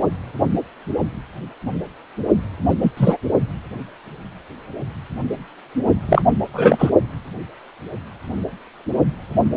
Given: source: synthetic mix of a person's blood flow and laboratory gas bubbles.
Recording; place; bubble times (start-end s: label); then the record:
Doppler ultrasound of blood flow; precordium
2.69-2.75 s: bubbles
2.81-2.92 s: bubbles
2.97-3.17 s: bubbles
6.08-6.22 s: bubbles
6.54-6.90 s: bubbles
From the record:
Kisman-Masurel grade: 223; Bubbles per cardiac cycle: several, 3 to 8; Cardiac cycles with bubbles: 10 to 50%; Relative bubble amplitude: loud (0.450 to 0.775); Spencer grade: 2 (many but less than half of the cardiac periods contain bubble signals, singularly or in groups); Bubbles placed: only in the low amplitude regions of the cardiac cycle